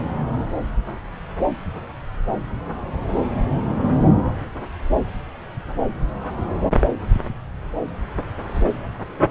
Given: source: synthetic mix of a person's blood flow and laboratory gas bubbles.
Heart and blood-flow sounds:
Doppler ultrasound of blood flow; subclavian vein
no bubbles
From the record:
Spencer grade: 0 (complete lack of bubble signals)

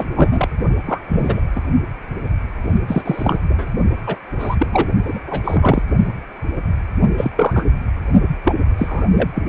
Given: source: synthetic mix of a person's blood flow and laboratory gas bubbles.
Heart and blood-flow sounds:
Doppler ultrasound of blood flow; precordium
0.00-0.04 s: bubbles
0.16-0.49 s: bubbles
0.86-1.01 s: bubbles
1.08-1.42 s: bubbles
1.55-1.60 s: bubbles
2.88-3.40 s: bubbles
3.49-3.70 s: bubbles
4.07-4.16 s: bubbles
4.38-4.56 s: bubbles
4.59-4.67 s: bubbles
4.71-4.88 s: bubbles
5.04-5.19 s: bubbles
5.27-5.40 s: bubbles
5.44-5.83 s: bubbles
7.17-7.31 s: bubbles
7.37-7.65 s: bubbles
8.43-8.54 s: bubbles
8.77-9.05 s: bubbles
9.12-9.28 s: bubbles
9.35-9.42 s: bubbles
From the record:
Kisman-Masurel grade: 233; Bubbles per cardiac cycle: several, 3 to 8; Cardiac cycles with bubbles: 50 to 99%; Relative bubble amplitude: loud (0.450 to 0.775); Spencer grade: 3 (all of the cardiac periods contain showers or single bubble signals, but not dominating or overriding the cardiac motion signals); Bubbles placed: only in the low amplitude regions of the cardiac cycle

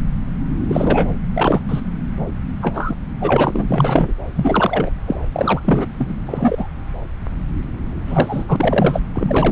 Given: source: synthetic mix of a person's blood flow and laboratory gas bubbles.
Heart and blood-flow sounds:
Doppler ultrasound of blood flow; subclavian vein
0.68-1.09 s: bubbles
1.36-1.60 s: bubbles
1.69-1.80 s: bubbles
2.61-2.96 s: bubbles
3.20-4.13 s: bubbles
4.35-4.90 s: bubbles
5.07-5.16 s: bubbles
5.33-5.62 s: bubbles
5.64-5.85 s: bubbles
5.98-6.16 s: bubbles
6.26-6.68 s: bubbles
8.06-9.02 s: bubbles
9.14-9.52 s: bubbles
From the record:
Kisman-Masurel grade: 233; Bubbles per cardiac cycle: several, 3 to 8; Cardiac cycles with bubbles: 50 to 99%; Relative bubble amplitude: loud (0.450 to 0.775); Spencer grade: 3 (all of the cardiac periods contain showers or single bubble signals, but not dominating or overriding the cardiac motion signals); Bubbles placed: anywhere in the cardiac cycle

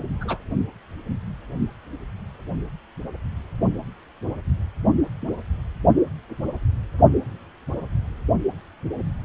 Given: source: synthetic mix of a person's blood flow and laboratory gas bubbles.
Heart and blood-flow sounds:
Doppler ultrasound of blood flow; precordium
0.20-0.41 s: bubbles
From the record:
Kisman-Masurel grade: 112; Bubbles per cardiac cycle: 1 to 2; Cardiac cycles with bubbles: 1 to 10%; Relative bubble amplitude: moderate (0.250 to 0.450); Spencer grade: 1 (occasional bubble signal discernible with the cardiac motion signal, with majority of cardiac periods free of bubbles); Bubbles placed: only in the low amplitude regions of the cardiac cycle

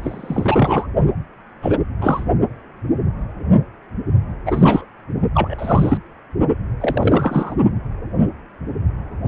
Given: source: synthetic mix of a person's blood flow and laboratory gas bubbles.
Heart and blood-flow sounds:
Doppler ultrasound of blood flow; precordium
0.01-0.86 s: bubbles
1.62-1.78 s: bubbles
2.01-2.24 s: bubbles
4.45-4.85 s: bubbles
5.34-5.98 s: bubbles
6.80-7.55 s: bubbles
From the record:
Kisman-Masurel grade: 233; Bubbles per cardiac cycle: several, 3 to 8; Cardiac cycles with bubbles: 50 to 99%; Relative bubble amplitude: loud (0.450 to 0.775); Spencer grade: 3 (all of the cardiac periods contain showers or single bubble signals, but not dominating or overriding the cardiac motion signals); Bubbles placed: only in the low amplitude regions of the cardiac cycle

